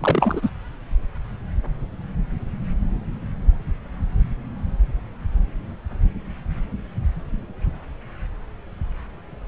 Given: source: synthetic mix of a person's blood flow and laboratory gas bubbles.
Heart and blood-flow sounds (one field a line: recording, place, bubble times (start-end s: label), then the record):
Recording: Doppler ultrasound of blood flow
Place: subclavian vein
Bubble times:
0.00-0.49 s: bubbles
From the record:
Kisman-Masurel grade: 212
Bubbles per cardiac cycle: several, 3 to 8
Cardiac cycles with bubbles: 1 to 10%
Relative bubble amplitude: moderate (0.250 to 0.450)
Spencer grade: 1 (occasional bubble signal discernible with the cardiac motion signal, with majority of cardiac periods free of bubbles)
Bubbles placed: anywhere in the cardiac cycle